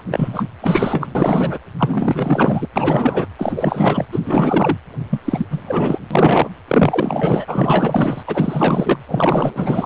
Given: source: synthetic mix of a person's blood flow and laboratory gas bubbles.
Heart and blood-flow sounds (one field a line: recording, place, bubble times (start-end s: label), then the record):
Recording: Doppler ultrasound of blood flow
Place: precordium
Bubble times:
0.00-0.02 s: bubbles
0.11-0.47 s: bubbles
0.60-1.58 s: bubbles
1.77-2.68 s: bubbles
2.76-3.27 s: bubbles
3.39-4.05 s: bubbles
4.12-4.20 s: bubbles
4.24-4.78 s: bubbles
5.09-5.21 s: bubbles
5.25-5.46 s: bubbles
5.50-5.63 s: bubbles
5.67-5.99 s: bubbles
6.11-6.49 s: bubbles
6.67-8.23 s: bubbles
8.27-8.97 s: bubbles
9.07-9.86 s: bubbles
From the record:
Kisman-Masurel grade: 444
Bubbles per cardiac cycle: continuous sound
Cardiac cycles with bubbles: 100%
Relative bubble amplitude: maximal (0.775 to 0.999)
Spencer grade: 4 (maximum detectable bubble signal sounding continuously throughout systole and diastole of every cardiac period, and overriding the amplitude of the normal cardiac signals)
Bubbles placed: anywhere in the cardiac cycle